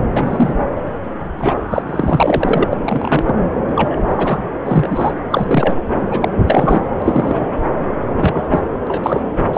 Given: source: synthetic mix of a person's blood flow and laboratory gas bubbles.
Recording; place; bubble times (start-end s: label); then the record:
Doppler ultrasound of blood flow; subclavian vein
0.16-0.54 s: bubbles
1.39-1.56 s: bubbles
1.70-1.83 s: bubbles
1.88-2.68 s: bubbles
2.71-2.77 s: bubbles
2.84-3.23 s: bubbles
3.27-3.36 s: bubbles
3.76-3.98 s: bubbles
4.04-4.40 s: bubbles
4.63-5.19 s: bubbles
5.30-5.75 s: bubbles
6.09-6.29 s: bubbles
6.45-6.80 s: bubbles
7.02-7.51 s: bubbles
8.20-8.44 s: bubbles
8.51-8.61 s: bubbles
8.87-9.22 s: bubbles
9.53-9.58 s: bubbles
From the record:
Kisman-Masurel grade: 243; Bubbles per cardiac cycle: several, 3 to 8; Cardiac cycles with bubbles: 100%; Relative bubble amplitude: loud (0.450 to 0.775); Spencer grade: 3 (all of the cardiac periods contain showers or single bubble signals, but not dominating or overriding the cardiac motion signals); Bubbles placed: anywhere in the cardiac cycle